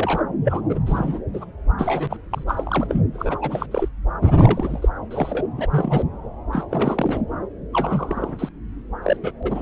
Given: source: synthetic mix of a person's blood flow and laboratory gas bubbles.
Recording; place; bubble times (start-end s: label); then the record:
Doppler ultrasound of blood flow; subclavian vein
0.00-0.24 s: bubbles
0.44-0.61 s: bubbles
0.69-0.80 s: bubbles
0.86-1.20 s: bubbles
1.33-1.45 s: bubbles
1.78-2.17 s: bubbles
2.30-2.43 s: bubbles
2.47-3.01 s: bubbles
3.13-3.38 s: bubbles
3.41-3.66 s: bubbles
3.71-3.88 s: bubbles
4.21-4.88 s: bubbles
5.10-5.45 s: bubbles
5.58-5.67 s: bubbles
5.70-6.02 s: bubbles
6.52-6.65 s: bubbles
6.71-7.21 s: bubbles
7.72-8.49 s: bubbles
9.03-9.16 s: bubbles
9.21-9.32 s: bubbles
9.42-9.62 s: bubbles
From the record:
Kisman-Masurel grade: 332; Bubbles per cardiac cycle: rolling drumbeat, 9 or more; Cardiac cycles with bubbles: 50 to 99%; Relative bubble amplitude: moderate (0.250 to 0.450); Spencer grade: 3 (all of the cardiac periods contain showers or single bubble signals, but not dominating or overriding the cardiac motion signals); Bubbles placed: anywhere in the cardiac cycle